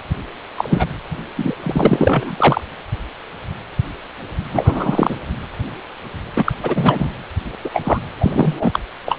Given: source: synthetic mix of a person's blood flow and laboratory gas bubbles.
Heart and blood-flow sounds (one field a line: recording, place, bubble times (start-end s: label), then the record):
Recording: Doppler ultrasound of blood flow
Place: precordium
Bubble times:
0.58-0.86 s: bubbles
1.36-1.55 s: bubbles
1.60-2.61 s: bubbles
4.52-5.17 s: bubbles
6.36-6.52 s: bubbles
6.62-7.11 s: bubbles
7.64-7.70 s: bubbles
7.74-7.99 s: bubbles
8.20-8.79 s: bubbles
9.06-9.18 s: bubbles
From the record:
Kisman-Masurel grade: 233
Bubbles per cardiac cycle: several, 3 to 8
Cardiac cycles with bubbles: 50 to 99%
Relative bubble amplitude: loud (0.450 to 0.775)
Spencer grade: 3 (all of the cardiac periods contain showers or single bubble signals, but not dominating or overriding the cardiac motion signals)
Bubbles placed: anywhere in the cardiac cycle